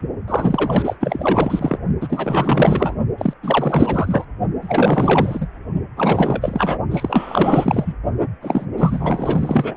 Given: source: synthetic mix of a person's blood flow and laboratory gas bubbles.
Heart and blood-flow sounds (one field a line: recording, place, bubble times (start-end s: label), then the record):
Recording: Doppler ultrasound of blood flow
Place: precordium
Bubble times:
0.27-0.96 s: bubbles
1.00-1.78 s: bubbles
2.00-2.96 s: bubbles
3.17-3.33 s: bubbles
3.42-4.25 s: bubbles
4.62-5.47 s: bubbles
5.96-6.79 s: bubbles
6.91-7.94 s: bubbles
8.41-8.65 s: bubbles
8.77-9.77 s: bubbles
From the record:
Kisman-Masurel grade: 444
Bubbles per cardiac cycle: continuous sound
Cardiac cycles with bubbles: 100%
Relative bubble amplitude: maximal (0.775 to 0.999)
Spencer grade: 4 (maximum detectable bubble signal sounding continuously throughout systole and diastole of every cardiac period, and overriding the amplitude of the normal cardiac signals)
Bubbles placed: only in the low amplitude regions of the cardiac cycle